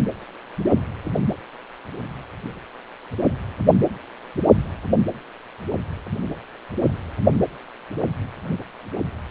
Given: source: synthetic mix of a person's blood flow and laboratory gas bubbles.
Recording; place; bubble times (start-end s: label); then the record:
Doppler ultrasound of blood flow; precordium
no bubbles
From the record:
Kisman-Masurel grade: 000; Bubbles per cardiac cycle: 0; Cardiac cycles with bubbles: 0%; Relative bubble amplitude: no bubbles discernible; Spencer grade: 0 (complete lack of bubble signals)